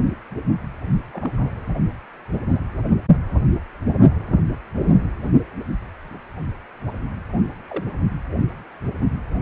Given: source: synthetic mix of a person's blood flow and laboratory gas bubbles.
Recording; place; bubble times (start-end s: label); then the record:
Doppler ultrasound of blood flow; precordium
1.11-1.30 s: bubbles
1.37-1.51 s: bubbles
7.68-7.85 s: bubbles
From the record:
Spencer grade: 2 (many but less than half of the cardiac periods contain bubble signals, singularly or in groups); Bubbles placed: anywhere in the cardiac cycle